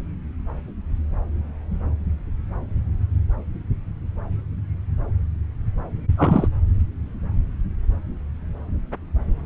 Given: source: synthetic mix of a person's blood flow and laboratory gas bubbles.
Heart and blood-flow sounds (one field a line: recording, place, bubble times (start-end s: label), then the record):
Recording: Doppler ultrasound of blood flow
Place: subclavian vein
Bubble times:
6.17-6.48 s: bubbles
From the record:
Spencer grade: 1 (occasional bubble signal discernible with the cardiac motion signal, with majority of cardiac periods free of bubbles)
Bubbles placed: anywhere in the cardiac cycle